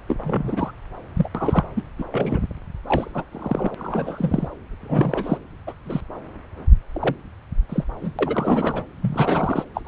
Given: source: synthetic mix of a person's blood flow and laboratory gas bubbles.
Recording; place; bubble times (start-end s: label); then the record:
Doppler ultrasound of blood flow; subclavian vein
0.08-0.71 s: bubbles
1.16-1.28 s: bubbles
1.34-1.67 s: bubbles
1.76-1.82 s: bubbles
1.98-2.04 s: bubbles
2.11-2.40 s: bubbles
2.85-3.25 s: bubbles
3.31-3.75 s: bubbles
3.77-4.48 s: bubbles
4.81-5.38 s: bubbles
5.67-5.73 s: bubbles
5.86-6.01 s: bubbles
6.93-7.16 s: bubbles
7.69-7.84 s: bubbles
8.02-8.12 s: bubbles
8.19-8.86 s: bubbles
9.02-9.64 s: bubbles
9.74-9.82 s: bubbles
9.85-9.88 s: bubbles
From the record:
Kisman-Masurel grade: 242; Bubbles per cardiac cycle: several, 3 to 8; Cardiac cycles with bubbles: 100%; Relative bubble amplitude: moderate (0.250 to 0.450); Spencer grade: 3 (all of the cardiac periods contain showers or single bubble signals, but not dominating or overriding the cardiac motion signals); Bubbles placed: anywhere in the cardiac cycle